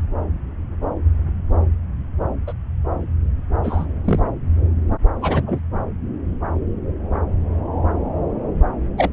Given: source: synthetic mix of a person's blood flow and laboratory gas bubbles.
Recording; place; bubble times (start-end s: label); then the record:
Doppler ultrasound of blood flow; subclavian vein
2.47-2.53 s: bubbles
3.64-3.86 s: bubbles
4.04-4.19 s: bubbles
5.21-5.59 s: bubbles
8.97-9.10 s: bubbles
From the record:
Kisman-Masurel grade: 122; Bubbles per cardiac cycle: 1 to 2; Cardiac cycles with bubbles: 10 to 50%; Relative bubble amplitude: moderate (0.250 to 0.450); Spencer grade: 2 (many but less than half of the cardiac periods contain bubble signals, singularly or in groups); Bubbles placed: anywhere in the cardiac cycle